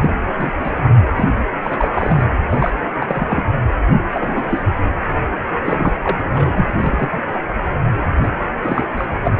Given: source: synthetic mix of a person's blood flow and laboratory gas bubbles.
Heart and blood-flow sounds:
Doppler ultrasound of blood flow; precordium
0.01-0.16 s: bubbles
0.27-0.59 s: bubbles
0.63-0.71 s: bubbles
0.84-0.90 s: bubbles
1.16-1.25 s: bubbles
1.62-1.88 s: bubbles
1.92-2.23 s: bubbles
2.49-2.71 s: bubbles
3.00-3.42 s: bubbles
4.12-4.65 s: bubbles
4.85-4.90 s: bubbles
5.65-5.92 s: bubbles
6.02-6.24 s: bubbles
6.33-6.72 s: bubbles
6.78-7.09 s: bubbles
7.13-7.24 s: bubbles
7.34-7.40 s: bubbles
8.22-8.29 s: bubbles
8.62-8.85 s: bubbles
8.97-9.05 s: bubbles
9.24-9.31 s: bubbles
From the record:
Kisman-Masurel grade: 242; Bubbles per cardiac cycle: several, 3 to 8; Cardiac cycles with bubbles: 100%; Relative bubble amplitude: moderate (0.250 to 0.450); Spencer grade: 3 (all of the cardiac periods contain showers or single bubble signals, but not dominating or overriding the cardiac motion signals); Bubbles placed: anywhere in the cardiac cycle

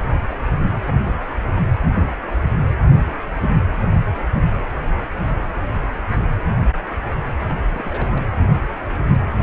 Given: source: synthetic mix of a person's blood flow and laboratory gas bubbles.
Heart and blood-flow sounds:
Doppler ultrasound of blood flow; precordium
7.42-7.55 s: bubbles
7.66-8.24 s: bubbles
From the record:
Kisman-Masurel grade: 211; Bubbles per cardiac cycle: several, 3 to 8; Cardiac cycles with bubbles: 1 to 10%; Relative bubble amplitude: barely perceptible (0.100 to 0.250); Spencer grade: 1 (occasional bubble signal discernible with the cardiac motion signal, with majority of cardiac periods free of bubbles); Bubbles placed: anywhere in the cardiac cycle

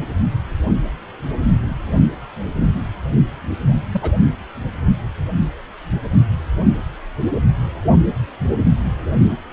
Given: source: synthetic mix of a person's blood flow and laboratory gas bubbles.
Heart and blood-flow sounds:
Doppler ultrasound of blood flow; precordium
3.92-4.12 s: bubbles
From the record:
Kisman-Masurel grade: 112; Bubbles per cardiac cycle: 1 to 2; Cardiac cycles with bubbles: 1 to 10%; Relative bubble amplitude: moderate (0.250 to 0.450); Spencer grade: 1 (occasional bubble signal discernible with the cardiac motion signal, with majority of cardiac periods free of bubbles); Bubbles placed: anywhere in the cardiac cycle

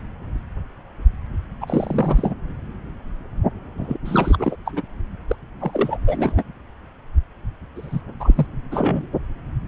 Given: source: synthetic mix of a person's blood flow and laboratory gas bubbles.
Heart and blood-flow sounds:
Doppler ultrasound of blood flow; subclavian vein
1.61-2.35 s: bubbles
3.77-3.97 s: bubbles
4.04-4.56 s: bubbles
4.65-4.81 s: bubbles
5.28-5.35 s: bubbles
5.60-5.97 s: bubbles
6.06-6.43 s: bubbles
7.75-8.01 s: bubbles
8.20-8.46 s: bubbles
8.71-9.07 s: bubbles
From the record:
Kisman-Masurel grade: 332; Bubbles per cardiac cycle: rolling drumbeat, 9 or more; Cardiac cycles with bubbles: 50 to 99%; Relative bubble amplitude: moderate (0.250 to 0.450); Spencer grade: 3 (all of the cardiac periods contain showers or single bubble signals, but not dominating or overriding the cardiac motion signals); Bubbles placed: anywhere in the cardiac cycle

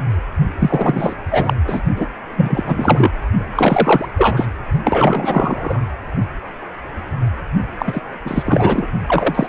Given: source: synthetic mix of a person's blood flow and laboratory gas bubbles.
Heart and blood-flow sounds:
Doppler ultrasound of blood flow; precordium
0.58-1.15 s: bubbles
1.31-1.53 s: bubbles
1.67-1.82 s: bubbles
1.97-2.07 s: bubbles
2.37-3.12 s: bubbles
3.55-4.06 s: bubbles
4.17-4.47 s: bubbles
4.84-5.81 s: bubbles
7.79-8.02 s: bubbles
8.24-8.43 s: bubbles
8.46-8.87 s: bubbles
9.06-9.47 s: bubbles
From the record:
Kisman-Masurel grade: 333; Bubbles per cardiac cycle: rolling drumbeat, 9 or more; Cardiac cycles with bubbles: 50 to 99%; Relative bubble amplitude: loud (0.450 to 0.775); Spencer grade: 3 (all of the cardiac periods contain showers or single bubble signals, but not dominating or overriding the cardiac motion signals); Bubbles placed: only in the low amplitude regions of the cardiac cycle

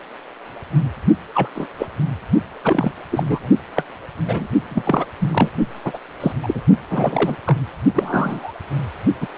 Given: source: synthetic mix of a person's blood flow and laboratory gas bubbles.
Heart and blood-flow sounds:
Doppler ultrasound of blood flow; precordium
1.34-1.49 s: bubbles
1.54-1.68 s: bubbles
1.78-1.88 s: bubbles
2.63-2.91 s: bubbles
3.11-3.48 s: bubbles
3.75-3.83 s: bubbles
4.25-4.47 s: bubbles
4.70-4.83 s: bubbles
4.85-5.08 s: bubbles
5.20-5.49 s: bubbles
5.84-5.99 s: bubbles
6.20-6.32 s: bubbles
6.42-6.62 s: bubbles
6.91-7.36 s: bubbles
7.46-7.57 s: bubbles
7.94-8.53 s: bubbles
9.21-9.27 s: bubbles
From the record:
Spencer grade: 3 (all of the cardiac periods contain showers or single bubble signals, but not dominating or overriding the cardiac motion signals); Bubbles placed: only in the low amplitude regions of the cardiac cycle

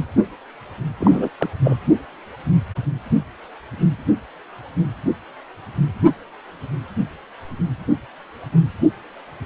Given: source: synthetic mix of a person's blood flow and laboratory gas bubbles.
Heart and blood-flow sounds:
Doppler ultrasound of blood flow; precordium
1.00-1.29 s: bubbles
1.38-1.48 s: bubbles
1.64-1.77 s: bubbles
From the record:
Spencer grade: 1 (occasional bubble signal discernible with the cardiac motion signal, with majority of cardiac periods free of bubbles); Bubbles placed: only in the low amplitude regions of the cardiac cycle

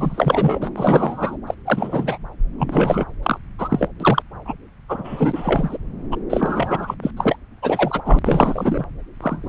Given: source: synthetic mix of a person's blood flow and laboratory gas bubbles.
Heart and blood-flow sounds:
Doppler ultrasound of blood flow; subclavian vein
0.00-0.69 s: bubbles
0.76-1.37 s: bubbles
1.46-1.54 s: bubbles
1.66-2.17 s: bubbles
2.58-3.05 s: bubbles
3.23-3.38 s: bubbles
3.58-3.88 s: bubbles
4.00-4.22 s: bubbles
4.45-4.54 s: bubbles
4.88-5.77 s: bubbles
6.11-6.16 s: bubbles
6.29-6.95 s: bubbles
7.03-7.11 s: bubbles
7.17-7.36 s: bubbles
7.62-8.02 s: bubbles
8.05-8.19 s: bubbles
8.25-8.85 s: bubbles
9.21-9.49 s: bubbles
From the record:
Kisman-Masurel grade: 343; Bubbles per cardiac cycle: rolling drumbeat, 9 or more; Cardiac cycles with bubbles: 100%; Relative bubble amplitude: loud (0.450 to 0.775); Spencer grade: 3 (all of the cardiac periods contain showers or single bubble signals, but not dominating or overriding the cardiac motion signals); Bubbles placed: anywhere in the cardiac cycle

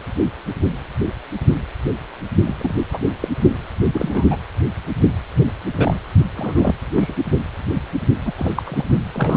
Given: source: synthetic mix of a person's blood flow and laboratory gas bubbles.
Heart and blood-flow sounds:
Doppler ultrasound of blood flow; precordium
2.46-2.55 s: bubbles
2.58-2.75 s: bubbles
2.92-2.98 s: bubbles
3.21-3.28 s: bubbles
3.92-4.36 s: bubbles
5.37-5.52 s: bubbles
5.77-6.00 s: bubbles
6.36-6.75 s: bubbles
6.95-7.13 s: bubbles
8.25-8.33 s: bubbles
8.36-8.62 s: bubbles
8.66-8.85 s: bubbles
9.13-9.37 s: bubbles
From the record:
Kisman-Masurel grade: 222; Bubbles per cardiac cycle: several, 3 to 8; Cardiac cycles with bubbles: 10 to 50%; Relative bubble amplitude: moderate (0.250 to 0.450); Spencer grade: 2 (many but less than half of the cardiac periods contain bubble signals, singularly or in groups); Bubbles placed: only in the low amplitude regions of the cardiac cycle

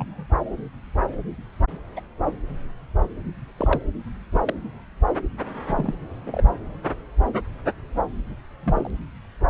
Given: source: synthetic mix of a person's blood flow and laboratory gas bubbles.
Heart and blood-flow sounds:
Doppler ultrasound of blood flow; subclavian vein
0.00-0.26 s: bubbles
1.96-2.01 s: bubbles
3.57-3.82 s: bubbles
4.32-4.39 s: bubbles
4.47-4.54 s: bubbles
5.64-5.94 s: bubbles
6.26-6.43 s: bubbles
8.63-8.90 s: bubbles
From the record:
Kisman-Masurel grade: 121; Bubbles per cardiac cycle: 1 to 2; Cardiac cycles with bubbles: 10 to 50%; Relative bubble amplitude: barely perceptible (0.100 to 0.250); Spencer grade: 2 (many but less than half of the cardiac periods contain bubble signals, singularly or in groups); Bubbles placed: anywhere in the cardiac cycle

